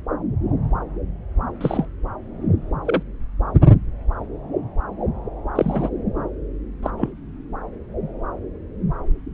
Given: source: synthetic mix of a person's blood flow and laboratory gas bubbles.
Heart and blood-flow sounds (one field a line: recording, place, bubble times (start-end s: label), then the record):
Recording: Doppler ultrasound of blood flow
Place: subclavian vein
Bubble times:
1.60-1.86 s: bubbles
2.85-3.02 s: bubbles
5.55-5.89 s: bubbles
6.82-6.90 s: bubbles
6.97-7.12 s: bubbles
From the record:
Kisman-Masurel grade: 122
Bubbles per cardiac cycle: 1 to 2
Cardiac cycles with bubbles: 10 to 50%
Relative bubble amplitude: moderate (0.250 to 0.450)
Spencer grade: 2 (many but less than half of the cardiac periods contain bubble signals, singularly or in groups)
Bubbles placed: anywhere in the cardiac cycle